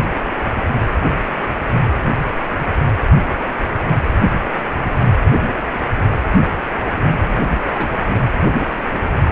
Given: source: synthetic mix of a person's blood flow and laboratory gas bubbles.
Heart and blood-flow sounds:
Doppler ultrasound of blood flow; precordium
7.21-7.38 s: bubbles
7.72-8.32 s: bubbles
From the record:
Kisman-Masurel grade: 211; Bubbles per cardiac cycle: several, 3 to 8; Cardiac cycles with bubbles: 1 to 10%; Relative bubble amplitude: barely perceptible (0.100 to 0.250); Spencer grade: 1 (occasional bubble signal discernible with the cardiac motion signal, with majority of cardiac periods free of bubbles); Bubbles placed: anywhere in the cardiac cycle

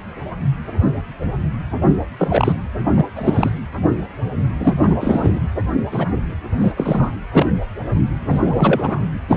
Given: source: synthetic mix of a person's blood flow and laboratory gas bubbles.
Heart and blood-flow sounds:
Doppler ultrasound of blood flow; precordium
2.19-2.52 s: bubbles
2.94-3.05 s: bubbles
3.15-3.50 s: bubbles
4.60-4.75 s: bubbles
4.82-5.40 s: bubbles
5.92-6.08 s: bubbles
6.61-6.72 s: bubbles
6.77-7.12 s: bubbles
7.32-7.46 s: bubbles
8.29-9.00 s: bubbles
9.28-9.37 s: bubbles
From the record:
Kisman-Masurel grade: 233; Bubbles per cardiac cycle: several, 3 to 8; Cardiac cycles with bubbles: 50 to 99%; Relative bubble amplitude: loud (0.450 to 0.775); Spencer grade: 3 (all of the cardiac periods contain showers or single bubble signals, but not dominating or overriding the cardiac motion signals); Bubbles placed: anywhere in the cardiac cycle

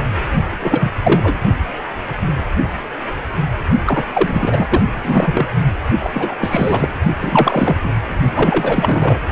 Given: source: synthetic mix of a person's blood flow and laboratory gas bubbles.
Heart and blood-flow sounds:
Doppler ultrasound of blood flow; precordium
0.59-0.92 s: bubbles
1.03-1.38 s: bubbles
3.86-4.03 s: bubbles
4.13-4.80 s: bubbles
5.04-5.46 s: bubbles
6.00-6.11 s: bubbles
6.13-6.34 s: bubbles
6.40-6.88 s: bubbles
7.21-7.76 s: bubbles
7.83-7.90 s: bubbles
8.34-9.19 s: bubbles
From the record:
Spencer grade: 3 (all of the cardiac periods contain showers or single bubble signals, but not dominating or overriding the cardiac motion signals); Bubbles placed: only in the low amplitude regions of the cardiac cycle

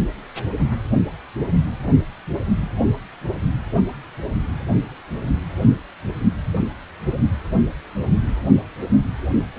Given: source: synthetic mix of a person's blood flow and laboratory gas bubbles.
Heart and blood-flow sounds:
Doppler ultrasound of blood flow; precordium
no bubbles
From the record:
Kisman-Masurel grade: 000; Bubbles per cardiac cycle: 0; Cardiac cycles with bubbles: 0%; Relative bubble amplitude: no bubbles discernible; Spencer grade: 0 (complete lack of bubble signals)

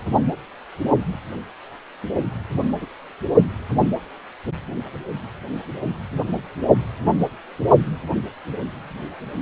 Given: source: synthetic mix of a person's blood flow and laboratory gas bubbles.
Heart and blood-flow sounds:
Doppler ultrasound of blood flow; precordium
2.26-2.32 s: bubbles
2.53-2.65 s: bubbles
2.81-2.86 s: bubbles
From the record:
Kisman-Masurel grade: 211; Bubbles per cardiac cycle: several, 3 to 8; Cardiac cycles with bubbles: 1 to 10%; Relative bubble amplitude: barely perceptible (0.100 to 0.250); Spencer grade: 1 (occasional bubble signal discernible with the cardiac motion signal, with majority of cardiac periods free of bubbles); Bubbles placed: only in the low amplitude regions of the cardiac cycle

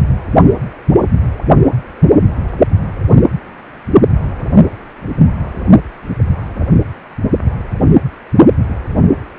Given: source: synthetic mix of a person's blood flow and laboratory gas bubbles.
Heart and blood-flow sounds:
Doppler ultrasound of blood flow; precordium
no bubbles
From the record:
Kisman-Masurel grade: 000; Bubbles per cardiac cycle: 0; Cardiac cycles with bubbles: 0%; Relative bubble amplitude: no bubbles discernible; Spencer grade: 0 (complete lack of bubble signals)

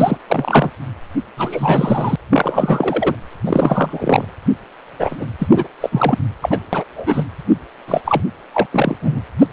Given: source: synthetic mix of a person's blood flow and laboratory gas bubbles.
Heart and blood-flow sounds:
Doppler ultrasound of blood flow; precordium
0.00-0.17 s: bubbles
0.27-0.70 s: bubbles
1.37-2.16 s: bubbles
2.30-3.15 s: bubbles
3.46-4.25 s: bubbles
4.99-5.26 s: bubbles
5.38-5.47 s: bubbles
5.52-5.67 s: bubbles
5.80-6.18 s: bubbles
6.42-6.59 s: bubbles
6.72-6.84 s: bubbles
6.96-7.24 s: bubbles
7.88-8.01 s: bubbles
8.05-8.21 s: bubbles
8.53-8.66 s: bubbles
8.71-8.97 s: bubbles
9.01-9.19 s: bubbles
9.39-9.47 s: bubbles
9.51-9.53 s: bubbles
From the record:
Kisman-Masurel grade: 343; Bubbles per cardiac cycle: rolling drumbeat, 9 or more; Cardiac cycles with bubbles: 100%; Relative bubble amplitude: loud (0.450 to 0.775); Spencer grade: 3 (all of the cardiac periods contain showers or single bubble signals, but not dominating or overriding the cardiac motion signals); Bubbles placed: anywhere in the cardiac cycle

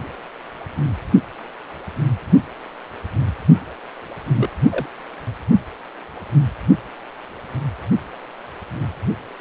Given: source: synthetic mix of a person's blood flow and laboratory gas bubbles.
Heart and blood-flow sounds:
Doppler ultrasound of blood flow; precordium
4.37-4.49 s: bubbles
4.71-4.87 s: bubbles
From the record:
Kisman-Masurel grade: 122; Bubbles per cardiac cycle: 1 to 2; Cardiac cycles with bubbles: 10 to 50%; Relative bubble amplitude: moderate (0.250 to 0.450); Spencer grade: 2 (many but less than half of the cardiac periods contain bubble signals, singularly or in groups); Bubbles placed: only in the low amplitude regions of the cardiac cycle

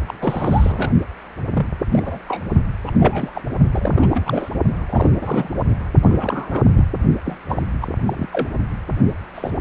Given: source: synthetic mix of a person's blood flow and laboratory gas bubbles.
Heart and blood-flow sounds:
Doppler ultrasound of blood flow; precordium
0.08-0.13 s: bubbles
0.21-0.91 s: bubbles
1.54-1.67 s: bubbles
1.91-2.19 s: bubbles
2.28-2.45 s: bubbles
2.86-2.91 s: bubbles
2.94-3.42 s: bubbles
3.72-4.49 s: bubbles
4.89-5.10 s: bubbles
5.21-5.49 s: bubbles
6.02-6.62 s: bubbles
6.74-6.85 s: bubbles
7.25-7.38 s: bubbles
7.49-7.62 s: bubbles
7.81-7.87 s: bubbles
8.07-8.29 s: bubbles
8.32-8.48 s: bubbles
9.34-9.51 s: bubbles
9.59-9.61 s: bubbles
From the record:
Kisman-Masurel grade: 242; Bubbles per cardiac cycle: several, 3 to 8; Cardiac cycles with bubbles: 100%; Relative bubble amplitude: moderate (0.250 to 0.450); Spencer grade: 3 (all of the cardiac periods contain showers or single bubble signals, but not dominating or overriding the cardiac motion signals); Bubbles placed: only in the low amplitude regions of the cardiac cycle

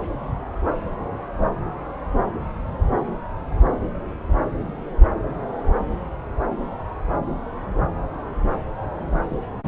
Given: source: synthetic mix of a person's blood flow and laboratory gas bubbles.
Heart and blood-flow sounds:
Doppler ultrasound of blood flow; subclavian vein
no bubbles
From the record:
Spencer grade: 0 (complete lack of bubble signals)

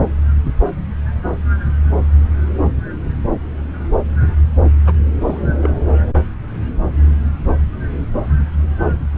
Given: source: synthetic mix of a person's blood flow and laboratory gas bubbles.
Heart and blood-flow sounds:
Doppler ultrasound of blood flow; subclavian vein
4.86-4.93 s: bubbles
5.27-5.38 s: bubbles
5.61-5.70 s: bubbles
8.79-8.98 s: bubbles
From the record:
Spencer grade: 2 (many but less than half of the cardiac periods contain bubble signals, singularly or in groups); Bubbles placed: anywhere in the cardiac cycle

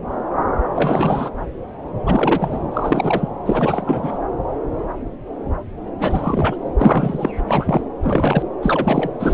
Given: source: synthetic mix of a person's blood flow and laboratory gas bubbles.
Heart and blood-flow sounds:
Doppler ultrasound of blood flow; subclavian vein
0.75-1.31 s: bubbles
2.06-2.58 s: bubbles
2.71-3.29 s: bubbles
3.46-4.19 s: bubbles
5.99-6.55 s: bubbles
6.76-7.31 s: bubbles
7.47-7.82 s: bubbles
8.02-8.42 s: bubbles
8.62-9.11 s: bubbles
9.19-9.34 s: bubbles
From the record:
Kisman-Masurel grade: 333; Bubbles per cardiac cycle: rolling drumbeat, 9 or more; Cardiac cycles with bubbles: 50 to 99%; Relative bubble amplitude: loud (0.450 to 0.775); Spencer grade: 3 (all of the cardiac periods contain showers or single bubble signals, but not dominating or overriding the cardiac motion signals); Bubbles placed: anywhere in the cardiac cycle

